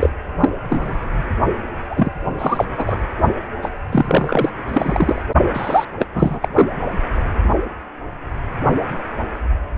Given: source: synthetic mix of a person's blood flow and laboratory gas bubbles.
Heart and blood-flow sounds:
Doppler ultrasound of blood flow; precordium
0.00-0.09 s: bubbles
0.40-0.50 s: bubbles
0.69-0.98 s: bubbles
1.89-2.10 s: bubbles
2.38-2.66 s: bubbles
2.77-2.98 s: bubbles
3.62-3.70 s: bubbles
3.92-4.50 s: bubbles
4.67-5.22 s: bubbles
5.54-5.85 s: bubbles
5.99-6.05 s: bubbles
6.14-6.40 s: bubbles
6.42-6.49 s: bubbles
6.55-6.68 s: bubbles
From the record:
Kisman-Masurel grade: 333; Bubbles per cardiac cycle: rolling drumbeat, 9 or more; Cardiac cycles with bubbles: 50 to 99%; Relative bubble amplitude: loud (0.450 to 0.775); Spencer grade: 3 (all of the cardiac periods contain showers or single bubble signals, but not dominating or overriding the cardiac motion signals); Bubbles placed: anywhere in the cardiac cycle

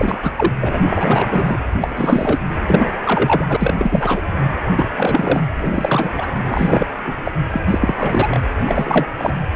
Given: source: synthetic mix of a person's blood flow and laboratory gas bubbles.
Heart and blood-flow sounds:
Doppler ultrasound of blood flow; precordium
0.00-0.32 s: bubbles
0.36-0.52 s: bubbles
0.61-1.58 s: bubbles
1.81-2.40 s: bubbles
2.67-2.98 s: bubbles
3.03-3.56 s: bubbles
3.59-4.22 s: bubbles
4.76-4.89 s: bubbles
4.96-5.43 s: bubbles
5.58-6.10 s: bubbles
6.18-6.32 s: bubbles
6.47-6.87 s: bubbles
7.06-7.14 s: bubbles
7.24-7.32 s: bubbles
7.50-7.61 s: bubbles
7.68-8.39 s: bubbles
8.66-9.07 s: bubbles
9.17-9.33 s: bubbles
From the record:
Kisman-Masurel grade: 343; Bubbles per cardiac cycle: rolling drumbeat, 9 or more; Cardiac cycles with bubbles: 100%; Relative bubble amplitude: loud (0.450 to 0.775); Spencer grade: 3 (all of the cardiac periods contain showers or single bubble signals, but not dominating or overriding the cardiac motion signals); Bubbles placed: anywhere in the cardiac cycle

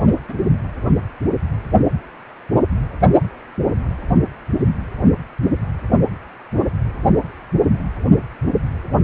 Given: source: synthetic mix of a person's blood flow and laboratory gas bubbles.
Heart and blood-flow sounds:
Doppler ultrasound of blood flow; precordium
0.28-0.34 s: bubbles
From the record:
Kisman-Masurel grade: 111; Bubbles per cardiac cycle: 1 to 2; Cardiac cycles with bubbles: 1 to 10%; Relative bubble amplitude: barely perceptible (0.100 to 0.250); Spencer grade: 1 (occasional bubble signal discernible with the cardiac motion signal, with majority of cardiac periods free of bubbles); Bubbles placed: only in the low amplitude regions of the cardiac cycle

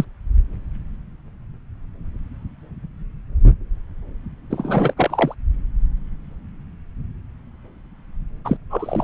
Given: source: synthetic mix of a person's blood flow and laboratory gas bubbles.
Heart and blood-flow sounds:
Doppler ultrasound of blood flow; subclavian vein
0.00-0.05 s: bubbles
4.50-4.93 s: bubbles
4.97-5.34 s: bubbles
8.45-8.57 s: bubbles
8.70-9.04 s: bubbles
From the record:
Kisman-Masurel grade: 222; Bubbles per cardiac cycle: several, 3 to 8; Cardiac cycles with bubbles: 10 to 50%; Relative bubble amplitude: moderate (0.250 to 0.450); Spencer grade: 2 (many but less than half of the cardiac periods contain bubble signals, singularly or in groups); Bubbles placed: anywhere in the cardiac cycle

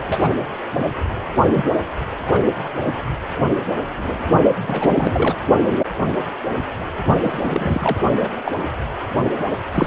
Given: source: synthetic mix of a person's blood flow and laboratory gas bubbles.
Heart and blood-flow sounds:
Doppler ultrasound of blood flow; precordium
0.08-0.28 s: bubbles
1.53-1.65 s: bubbles
2.25-2.42 s: bubbles
4.69-5.35 s: bubbles
7.18-8.00 s: bubbles
8.17-8.29 s: bubbles
8.46-8.51 s: bubbles
9.74-9.87 s: bubbles
From the record:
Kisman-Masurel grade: 232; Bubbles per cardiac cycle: several, 3 to 8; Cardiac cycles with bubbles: 50 to 99%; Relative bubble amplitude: moderate (0.250 to 0.450); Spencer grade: 3 (all of the cardiac periods contain showers or single bubble signals, but not dominating or overriding the cardiac motion signals); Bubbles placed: anywhere in the cardiac cycle

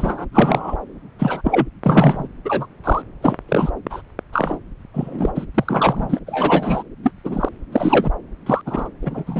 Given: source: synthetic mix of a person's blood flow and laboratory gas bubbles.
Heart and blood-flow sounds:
Doppler ultrasound of blood flow; subclavian vein
0.00-0.26 s: bubbles
0.33-0.78 s: bubbles
1.19-1.66 s: bubbles
1.83-2.28 s: bubbles
2.45-2.67 s: bubbles
2.83-3.02 s: bubbles
3.22-3.37 s: bubbles
3.48-3.71 s: bubbles
3.90-4.01 s: bubbles
4.32-4.58 s: bubbles
4.94-5.45 s: bubbles
5.54-6.19 s: bubbles
6.26-6.83 s: bubbles
7.03-7.11 s: bubbles
7.23-7.49 s: bubbles
7.72-8.11 s: bubbles
8.46-8.62 s: bubbles
8.66-8.89 s: bubbles
9.02-9.40 s: bubbles
From the record:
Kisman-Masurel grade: 243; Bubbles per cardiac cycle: several, 3 to 8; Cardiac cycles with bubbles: 100%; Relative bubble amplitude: loud (0.450 to 0.775); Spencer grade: 3 (all of the cardiac periods contain showers or single bubble signals, but not dominating or overriding the cardiac motion signals); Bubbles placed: anywhere in the cardiac cycle

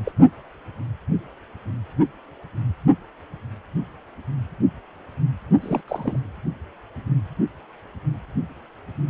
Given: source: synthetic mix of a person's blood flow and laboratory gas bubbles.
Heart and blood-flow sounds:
Doppler ultrasound of blood flow; precordium
0.05-0.12 s: bubbles
5.61-5.80 s: bubbles
5.88-6.19 s: bubbles
From the record:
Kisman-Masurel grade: 221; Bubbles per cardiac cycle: several, 3 to 8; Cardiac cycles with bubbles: 10 to 50%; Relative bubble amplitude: barely perceptible (0.100 to 0.250); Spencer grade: 2 (many but less than half of the cardiac periods contain bubble signals, singularly or in groups); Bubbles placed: only in the low amplitude regions of the cardiac cycle

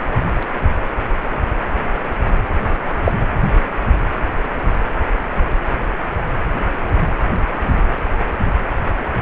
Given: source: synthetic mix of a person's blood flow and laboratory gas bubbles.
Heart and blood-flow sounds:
Doppler ultrasound of blood flow; precordium
3.04-3.12 s: bubbles
From the record:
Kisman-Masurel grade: 113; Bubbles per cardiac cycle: 1 to 2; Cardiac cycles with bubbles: 1 to 10%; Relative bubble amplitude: loud (0.450 to 0.775); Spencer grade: 1 (occasional bubble signal discernible with the cardiac motion signal, with majority of cardiac periods free of bubbles); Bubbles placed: anywhere in the cardiac cycle

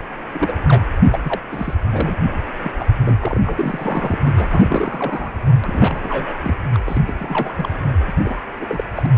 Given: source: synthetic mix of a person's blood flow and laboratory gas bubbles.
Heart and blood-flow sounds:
Doppler ultrasound of blood flow; precordium
0.32-0.53 s: bubbles
0.68-0.84 s: bubbles
1.10-1.19 s: bubbles
1.23-1.40 s: bubbles
1.52-1.74 s: bubbles
1.92-2.15 s: bubbles
2.62-2.72 s: bubbles
2.79-2.85 s: bubbles
3.04-3.40 s: bubbles
3.45-4.18 s: bubbles
4.23-4.30 s: bubbles
4.35-5.30 s: bubbles
5.63-6.00 s: bubbles
6.03-6.38 s: bubbles
6.42-6.54 s: bubbles
6.73-6.79 s: bubbles
6.85-7.01 s: bubbles
7.07-7.14 s: bubbles
7.18-7.53 s: bubbles
7.55-7.68 s: bubbles
8.07-8.12 s: bubbles
8.24-8.43 s: bubbles
8.61-8.84 s: bubbles
8.95-9.10 s: bubbles
From the record:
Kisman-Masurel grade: 342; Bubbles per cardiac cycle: rolling drumbeat, 9 or more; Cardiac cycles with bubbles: 100%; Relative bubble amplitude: moderate (0.250 to 0.450); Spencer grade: 3 (all of the cardiac periods contain showers or single bubble signals, but not dominating or overriding the cardiac motion signals); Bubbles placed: anywhere in the cardiac cycle

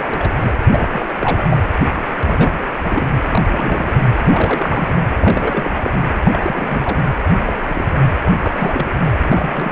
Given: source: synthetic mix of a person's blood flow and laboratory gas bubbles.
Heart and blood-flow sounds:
Doppler ultrasound of blood flow; precordium
0.00-0.32 s: bubbles
0.40-0.53 s: bubbles
0.67-1.06 s: bubbles
1.16-1.46 s: bubbles
1.49-1.57 s: bubbles
2.18-2.53 s: bubbles
2.79-3.10 s: bubbles
3.15-3.42 s: bubbles
3.53-3.93 s: bubbles
3.99-4.07 s: bubbles
4.15-4.95 s: bubbles
5.18-5.90 s: bubbles
5.94-6.02 s: bubbles
6.23-7.02 s: bubbles
7.46-7.53 s: bubbles
7.66-7.87 s: bubbles
8.42-8.87 s: bubbles
9.05-9.12 s: bubbles
9.21-9.72 s: bubbles
From the record:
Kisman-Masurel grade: 342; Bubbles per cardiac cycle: rolling drumbeat, 9 or more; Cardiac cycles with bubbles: 100%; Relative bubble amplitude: moderate (0.250 to 0.450); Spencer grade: 3 (all of the cardiac periods contain showers or single bubble signals, but not dominating or overriding the cardiac motion signals); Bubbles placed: anywhere in the cardiac cycle

